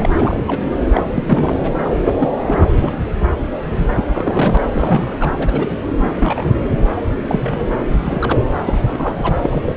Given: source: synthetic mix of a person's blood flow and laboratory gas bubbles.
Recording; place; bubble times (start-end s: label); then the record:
Doppler ultrasound of blood flow; subclavian vein
0.00-0.11 s: bubbles
0.14-0.45 s: bubbles
0.48-0.60 s: bubbles
0.93-1.03 s: bubbles
1.14-1.23 s: bubbles
1.26-1.57 s: bubbles
1.84-1.89 s: bubbles
2.20-2.28 s: bubbles
2.43-2.68 s: bubbles
2.80-3.06 s: bubbles
3.78-3.87 s: bubbles
4.08-4.58 s: bubbles
4.71-5.16 s: bubbles
5.20-5.33 s: bubbles
5.39-5.79 s: bubbles
6.19-6.56 s: bubbles
7.28-7.69 s: bubbles
8.00-8.38 s: bubbles
8.66-9.34 s: bubbles
9.41-9.75 s: bubbles
From the record:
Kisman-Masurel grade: 242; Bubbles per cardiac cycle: several, 3 to 8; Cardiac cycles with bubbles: 100%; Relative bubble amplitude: moderate (0.250 to 0.450); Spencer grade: 3 (all of the cardiac periods contain showers or single bubble signals, but not dominating or overriding the cardiac motion signals); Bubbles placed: anywhere in the cardiac cycle